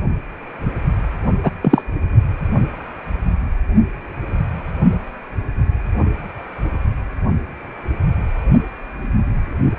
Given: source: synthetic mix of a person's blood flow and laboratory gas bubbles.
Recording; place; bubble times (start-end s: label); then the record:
Doppler ultrasound of blood flow; precordium
1.43-1.51 s: bubbles
1.62-1.82 s: bubbles
From the record:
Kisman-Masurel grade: 223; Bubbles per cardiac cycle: several, 3 to 8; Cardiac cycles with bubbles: 10 to 50%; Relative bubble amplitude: loud (0.450 to 0.775); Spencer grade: 2 (many but less than half of the cardiac periods contain bubble signals, singularly or in groups); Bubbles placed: only in the low amplitude regions of the cardiac cycle